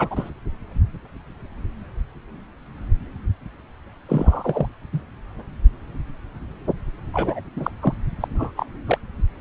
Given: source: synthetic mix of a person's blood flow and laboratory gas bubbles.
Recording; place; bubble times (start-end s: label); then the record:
Doppler ultrasound of blood flow; subclavian vein
0.00-0.30 s: bubbles
4.08-4.67 s: bubbles
4.92-5.01 s: bubbles
7.13-7.40 s: bubbles
7.56-7.70 s: bubbles
7.81-7.93 s: bubbles
8.20-8.27 s: bubbles
8.34-8.51 s: bubbles
8.56-8.66 s: bubbles
8.87-8.98 s: bubbles
From the record:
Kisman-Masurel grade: 222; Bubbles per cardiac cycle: several, 3 to 8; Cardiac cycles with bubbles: 10 to 50%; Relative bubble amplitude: moderate (0.250 to 0.450); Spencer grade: 2 (many but less than half of the cardiac periods contain bubble signals, singularly or in groups); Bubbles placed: anywhere in the cardiac cycle